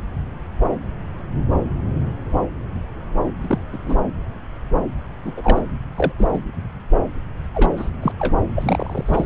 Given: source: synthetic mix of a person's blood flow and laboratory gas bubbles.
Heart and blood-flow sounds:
Doppler ultrasound of blood flow; subclavian vein
3.41-3.58 s: bubbles
3.72-3.78 s: bubbles
3.85-3.96 s: bubbles
5.25-5.33 s: bubbles
5.37-5.62 s: bubbles
5.96-6.12 s: bubbles
6.18-6.39 s: bubbles
7.54-7.71 s: bubbles
7.77-7.90 s: bubbles
8.02-8.12 s: bubbles
8.19-8.38 s: bubbles
8.57-9.26 s: bubbles
From the record:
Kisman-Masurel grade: 222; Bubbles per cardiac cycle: several, 3 to 8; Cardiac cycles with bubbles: 10 to 50%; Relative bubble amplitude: moderate (0.250 to 0.450); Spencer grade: 2 (many but less than half of the cardiac periods contain bubble signals, singularly or in groups); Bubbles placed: anywhere in the cardiac cycle

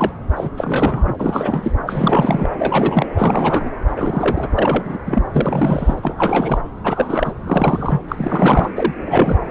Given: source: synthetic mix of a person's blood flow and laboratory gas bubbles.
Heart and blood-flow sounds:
Doppler ultrasound of blood flow; subclavian vein
0.00-0.12 s: bubbles
0.36-0.49 s: bubbles
0.56-1.16 s: bubbles
1.19-1.72 s: bubbles
1.86-2.48 s: bubbles
2.58-3.06 s: bubbles
3.15-3.71 s: bubbles
3.88-4.48 s: bubbles
4.55-4.99 s: bubbles
5.05-5.23 s: bubbles
5.33-6.60 s: bubbles
6.84-7.33 s: bubbles
7.44-8.02 s: bubbles
8.08-8.71 s: bubbles
8.76-8.94 s: bubbles
9.05-9.37 s: bubbles
From the record:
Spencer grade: 3 (all of the cardiac periods contain showers or single bubble signals, but not dominating or overriding the cardiac motion signals); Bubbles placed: anywhere in the cardiac cycle

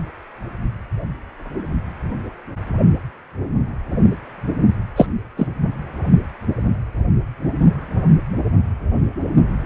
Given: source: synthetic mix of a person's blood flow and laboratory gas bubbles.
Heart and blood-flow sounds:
Doppler ultrasound of blood flow; precordium
4.96-5.06 s: bubbles
5.37-5.47 s: bubbles
From the record:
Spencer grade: 1 (occasional bubble signal discernible with the cardiac motion signal, with majority of cardiac periods free of bubbles); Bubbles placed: anywhere in the cardiac cycle

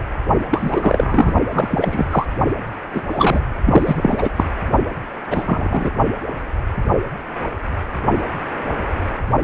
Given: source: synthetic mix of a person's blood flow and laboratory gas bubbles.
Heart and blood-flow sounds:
Doppler ultrasound of blood flow; precordium
0.51-1.33 s: bubbles
1.51-2.27 s: bubbles
2.94-3.02 s: bubbles
3.08-3.40 s: bubbles
3.65-4.29 s: bubbles
4.36-4.45 s: bubbles
5.30-5.91 s: bubbles
From the record:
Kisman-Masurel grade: 233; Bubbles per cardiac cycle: several, 3 to 8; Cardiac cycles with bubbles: 50 to 99%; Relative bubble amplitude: loud (0.450 to 0.775); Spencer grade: 3 (all of the cardiac periods contain showers or single bubble signals, but not dominating or overriding the cardiac motion signals); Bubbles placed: only in the low amplitude regions of the cardiac cycle

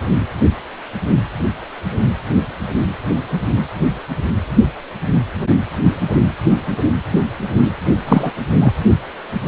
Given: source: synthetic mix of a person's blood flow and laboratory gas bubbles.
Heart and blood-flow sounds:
Doppler ultrasound of blood flow; precordium
8.06-8.32 s: bubbles
8.61-8.72 s: bubbles
From the record:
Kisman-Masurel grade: 213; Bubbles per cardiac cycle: several, 3 to 8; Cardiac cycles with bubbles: 1 to 10%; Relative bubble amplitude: loud (0.450 to 0.775); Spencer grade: 1 (occasional bubble signal discernible with the cardiac motion signal, with majority of cardiac periods free of bubbles); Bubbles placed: only in the low amplitude regions of the cardiac cycle

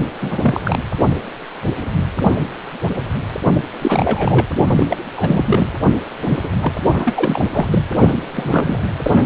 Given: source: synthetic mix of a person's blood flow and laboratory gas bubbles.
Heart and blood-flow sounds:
Doppler ultrasound of blood flow; precordium
0.21-0.60 s: bubbles
0.65-0.82 s: bubbles
3.44-3.62 s: bubbles
3.81-4.46 s: bubbles
4.69-4.87 s: bubbles
4.89-4.96 s: bubbles
5.13-5.67 s: bubbles
6.26-6.50 s: bubbles
6.62-6.74 s: bubbles
6.86-7.45 s: bubbles
7.52-7.68 s: bubbles
7.71-7.83 s: bubbles
7.97-8.20 s: bubbles
8.34-8.89 s: bubbles
9.05-9.26 s: bubbles
From the record:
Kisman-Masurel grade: 332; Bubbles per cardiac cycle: rolling drumbeat, 9 or more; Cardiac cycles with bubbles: 50 to 99%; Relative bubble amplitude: moderate (0.250 to 0.450); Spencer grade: 3 (all of the cardiac periods contain showers or single bubble signals, but not dominating or overriding the cardiac motion signals); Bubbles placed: anywhere in the cardiac cycle

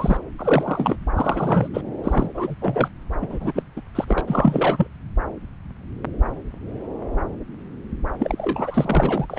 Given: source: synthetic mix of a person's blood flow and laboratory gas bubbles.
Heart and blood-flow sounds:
Doppler ultrasound of blood flow; subclavian vein
0.00-0.17 s: bubbles
0.38-0.97 s: bubbles
1.15-1.68 s: bubbles
1.74-1.81 s: bubbles
2.04-2.29 s: bubbles
2.34-2.55 s: bubbles
2.61-2.88 s: bubbles
3.22-3.27 s: bubbles
3.29-3.52 s: bubbles
3.54-3.62 s: bubbles
3.76-3.81 s: bubbles
3.95-4.04 s: bubbles
4.08-4.24 s: bubbles
4.27-4.87 s: bubbles
8.19-9.26 s: bubbles
9.29-9.38 s: bubbles
From the record:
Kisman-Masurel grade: 332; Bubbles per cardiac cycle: rolling drumbeat, 9 or more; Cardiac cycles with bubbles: 50 to 99%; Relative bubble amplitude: moderate (0.250 to 0.450); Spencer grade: 3 (all of the cardiac periods contain showers or single bubble signals, but not dominating or overriding the cardiac motion signals); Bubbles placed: anywhere in the cardiac cycle

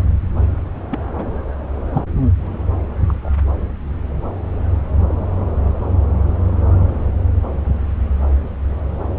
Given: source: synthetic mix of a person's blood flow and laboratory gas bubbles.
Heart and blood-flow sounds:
Doppler ultrasound of blood flow; subclavian vein
0.91-0.99 s: bubbles
1.17-1.26 s: bubbles
1.92-2.01 s: bubbles
3.08-3.29 s: bubbles
From the record:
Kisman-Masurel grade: 122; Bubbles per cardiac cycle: 1 to 2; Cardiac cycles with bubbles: 10 to 50%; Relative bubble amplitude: moderate (0.250 to 0.450); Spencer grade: 2 (many but less than half of the cardiac periods contain bubble signals, singularly or in groups); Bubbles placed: anywhere in the cardiac cycle

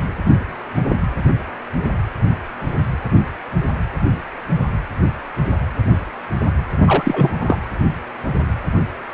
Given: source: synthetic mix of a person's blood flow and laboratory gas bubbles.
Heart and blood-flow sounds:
Doppler ultrasound of blood flow; precordium
6.85-7.39 s: bubbles
7.41-7.57 s: bubbles
From the record:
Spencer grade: 1 (occasional bubble signal discernible with the cardiac motion signal, with majority of cardiac periods free of bubbles); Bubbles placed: anywhere in the cardiac cycle

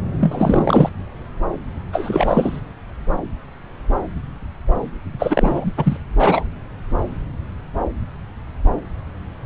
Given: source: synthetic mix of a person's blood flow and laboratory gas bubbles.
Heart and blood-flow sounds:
Doppler ultrasound of blood flow; subclavian vein
0.20-0.90 s: bubbles
1.93-2.60 s: bubbles
5.19-5.71 s: bubbles
5.77-5.97 s: bubbles
6.19-6.46 s: bubbles
From the record:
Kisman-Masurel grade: 223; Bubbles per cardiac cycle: several, 3 to 8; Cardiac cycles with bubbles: 10 to 50%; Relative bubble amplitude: loud (0.450 to 0.775); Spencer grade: 2 (many but less than half of the cardiac periods contain bubble signals, singularly or in groups); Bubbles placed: anywhere in the cardiac cycle

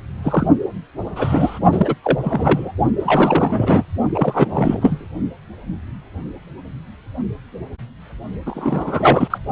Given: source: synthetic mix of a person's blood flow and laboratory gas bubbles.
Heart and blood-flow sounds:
Doppler ultrasound of blood flow; precordium
0.22-0.48 s: bubbles
1.15-1.60 s: bubbles
1.72-1.96 s: bubbles
2.02-2.19 s: bubbles
2.24-2.72 s: bubbles
2.99-3.84 s: bubbles
4.15-4.47 s: bubbles
4.50-5.08 s: bubbles
8.45-9.38 s: bubbles
From the record:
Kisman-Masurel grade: 333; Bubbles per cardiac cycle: rolling drumbeat, 9 or more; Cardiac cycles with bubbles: 50 to 99%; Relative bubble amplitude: loud (0.450 to 0.775); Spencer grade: 3 (all of the cardiac periods contain showers or single bubble signals, but not dominating or overriding the cardiac motion signals); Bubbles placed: only in the low amplitude regions of the cardiac cycle

